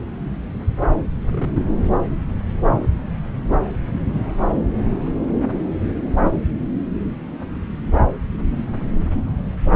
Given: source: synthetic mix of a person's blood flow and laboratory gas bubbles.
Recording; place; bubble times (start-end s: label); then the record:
Doppler ultrasound of blood flow; subclavian vein
1.28-1.49 s: bubbles
1.55-1.66 s: bubbles
From the record:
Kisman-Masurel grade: 111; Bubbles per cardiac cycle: 1 to 2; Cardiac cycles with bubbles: 1 to 10%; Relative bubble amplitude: barely perceptible (0.100 to 0.250); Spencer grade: 1 (occasional bubble signal discernible with the cardiac motion signal, with majority of cardiac periods free of bubbles); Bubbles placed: anywhere in the cardiac cycle